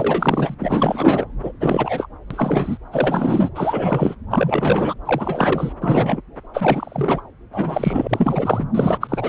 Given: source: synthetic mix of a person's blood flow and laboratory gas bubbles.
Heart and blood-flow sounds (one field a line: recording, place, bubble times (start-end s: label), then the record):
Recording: Doppler ultrasound of blood flow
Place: subclavian vein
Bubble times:
0.00-0.55 s: bubbles
0.59-1.25 s: bubbles
1.43-1.52 s: bubbles
1.60-2.07 s: bubbles
2.30-2.78 s: bubbles
2.92-3.49 s: bubbles
3.55-4.16 s: bubbles
4.31-4.94 s: bubbles
5.05-5.73 s: bubbles
5.81-6.21 s: bubbles
6.54-7.22 s: bubbles
7.53-8.64 s: bubbles
8.74-8.98 s: bubbles
9.01-9.29 s: bubbles
From the record:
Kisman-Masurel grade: 342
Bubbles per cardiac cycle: rolling drumbeat, 9 or more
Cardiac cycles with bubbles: 100%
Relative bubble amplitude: moderate (0.250 to 0.450)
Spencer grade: 3 (all of the cardiac periods contain showers or single bubble signals, but not dominating or overriding the cardiac motion signals)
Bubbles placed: anywhere in the cardiac cycle